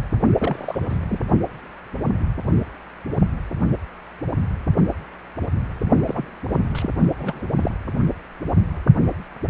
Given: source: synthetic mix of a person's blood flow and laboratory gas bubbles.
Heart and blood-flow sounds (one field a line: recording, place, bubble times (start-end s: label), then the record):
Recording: Doppler ultrasound of blood flow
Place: precordium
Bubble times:
0.38-1.22 s: bubbles
6.05-6.25 s: bubbles
6.50-6.58 s: bubbles
6.75-6.89 s: bubbles
7.19-7.44 s: bubbles
7.56-7.70 s: bubbles
From the record:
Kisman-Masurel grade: 221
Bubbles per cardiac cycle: several, 3 to 8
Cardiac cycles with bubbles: 10 to 50%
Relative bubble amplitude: barely perceptible (0.100 to 0.250)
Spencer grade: 2 (many but less than half of the cardiac periods contain bubble signals, singularly or in groups)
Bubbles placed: only in the low amplitude regions of the cardiac cycle